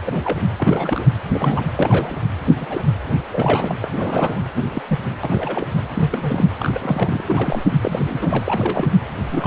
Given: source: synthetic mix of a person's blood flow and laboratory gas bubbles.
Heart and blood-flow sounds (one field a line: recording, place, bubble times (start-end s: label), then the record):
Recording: Doppler ultrasound of blood flow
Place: precordium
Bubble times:
0.06-0.20 s: bubbles
0.24-0.40 s: bubbles
0.58-1.08 s: bubbles
1.33-1.61 s: bubbles
1.79-2.23 s: bubbles
2.50-2.81 s: bubbles
3.32-3.75 s: bubbles
3.81-3.88 s: bubbles
3.92-4.46 s: bubbles
4.55-4.82 s: bubbles
4.88-5.00 s: bubbles
5.23-5.73 s: bubbles
5.93-6.46 s: bubbles
6.59-7.24 s: bubbles
7.28-7.62 s: bubbles
7.81-8.91 s: bubbles
9.31-9.46 s: bubbles
From the record:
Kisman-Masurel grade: 242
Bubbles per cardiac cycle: several, 3 to 8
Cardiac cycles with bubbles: 100%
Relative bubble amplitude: moderate (0.250 to 0.450)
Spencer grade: 3 (all of the cardiac periods contain showers or single bubble signals, but not dominating or overriding the cardiac motion signals)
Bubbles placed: anywhere in the cardiac cycle